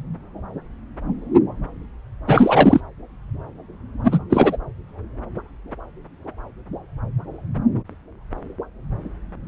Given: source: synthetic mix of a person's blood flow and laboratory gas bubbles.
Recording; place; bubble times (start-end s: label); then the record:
Doppler ultrasound of blood flow; subclavian vein
2.27-2.81 s: bubbles
4.04-4.18 s: bubbles
4.30-4.57 s: bubbles
From the record:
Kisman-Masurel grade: 213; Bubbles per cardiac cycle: several, 3 to 8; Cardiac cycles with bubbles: 1 to 10%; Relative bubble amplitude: loud (0.450 to 0.775); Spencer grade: 1 (occasional bubble signal discernible with the cardiac motion signal, with majority of cardiac periods free of bubbles); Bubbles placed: anywhere in the cardiac cycle